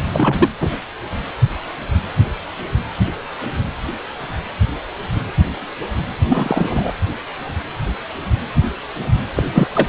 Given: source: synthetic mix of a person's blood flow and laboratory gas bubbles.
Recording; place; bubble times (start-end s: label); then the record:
Doppler ultrasound of blood flow; precordium
0.11-0.37 s: bubbles
0.40-0.49 s: bubbles
0.60-0.70 s: bubbles
6.29-6.91 s: bubbles
9.35-9.43 s: bubbles
9.53-9.67 s: bubbles
9.75-9.88 s: bubbles
From the record:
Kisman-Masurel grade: 223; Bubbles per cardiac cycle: several, 3 to 8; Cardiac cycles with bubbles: 10 to 50%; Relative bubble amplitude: loud (0.450 to 0.775); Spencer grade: 2 (many but less than half of the cardiac periods contain bubble signals, singularly or in groups); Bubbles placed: anywhere in the cardiac cycle